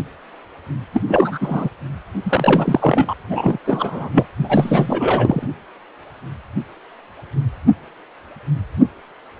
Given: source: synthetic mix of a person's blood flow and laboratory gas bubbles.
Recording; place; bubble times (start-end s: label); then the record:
Doppler ultrasound of blood flow; precordium
0.93-1.02 s: bubbles
1.08-1.38 s: bubbles
1.41-1.69 s: bubbles
2.23-3.14 s: bubbles
3.29-3.58 s: bubbles
3.67-4.26 s: bubbles
4.42-5.46 s: bubbles
From the record:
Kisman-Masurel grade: 333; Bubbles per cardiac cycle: rolling drumbeat, 9 or more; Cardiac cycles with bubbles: 50 to 99%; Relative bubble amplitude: loud (0.450 to 0.775); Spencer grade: 3 (all of the cardiac periods contain showers or single bubble signals, but not dominating or overriding the cardiac motion signals); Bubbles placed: anywhere in the cardiac cycle